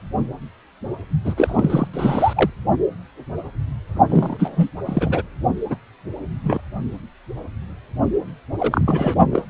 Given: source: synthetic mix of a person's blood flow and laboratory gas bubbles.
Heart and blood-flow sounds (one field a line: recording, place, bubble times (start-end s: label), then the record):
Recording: Doppler ultrasound of blood flow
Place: precordium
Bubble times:
1.24-1.88 s: bubbles
1.93-2.50 s: bubbles
4.10-4.70 s: bubbles
4.85-5.22 s: bubbles
5.70-5.77 s: bubbles
6.44-6.61 s: bubbles
8.59-9.14 s: bubbles
9.31-9.43 s: bubbles
From the record:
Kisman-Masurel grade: 232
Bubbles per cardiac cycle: several, 3 to 8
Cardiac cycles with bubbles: 50 to 99%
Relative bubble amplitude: moderate (0.250 to 0.450)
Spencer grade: 3 (all of the cardiac periods contain showers or single bubble signals, but not dominating or overriding the cardiac motion signals)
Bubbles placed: only in the low amplitude regions of the cardiac cycle